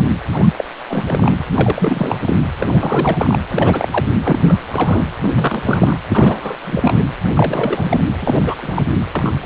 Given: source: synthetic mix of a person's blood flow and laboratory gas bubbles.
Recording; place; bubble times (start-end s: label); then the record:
Doppler ultrasound of blood flow; precordium
0.00-0.03 s: bubbles
0.32-0.49 s: bubbles
0.58-0.64 s: bubbles
0.89-1.44 s: bubbles
1.54-2.36 s: bubbles
2.59-3.37 s: bubbles
3.49-3.88 s: bubbles
3.90-4.05 s: bubbles
4.22-5.04 s: bubbles
5.21-5.31 s: bubbles
5.35-5.99 s: bubbles
6.10-6.58 s: bubbles
6.65-7.08 s: bubbles
7.33-8.08 s: bubbles
8.21-8.42 s: bubbles
8.46-8.55 s: bubbles
8.62-8.87 s: bubbles
9.15-9.34 s: bubbles
9.41-9.46 s: bubbles
From the record:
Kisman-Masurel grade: 342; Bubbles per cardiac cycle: rolling drumbeat, 9 or more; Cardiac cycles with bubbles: 100%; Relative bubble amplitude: moderate (0.250 to 0.450); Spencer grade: 3 (all of the cardiac periods contain showers or single bubble signals, but not dominating or overriding the cardiac motion signals); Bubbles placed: anywhere in the cardiac cycle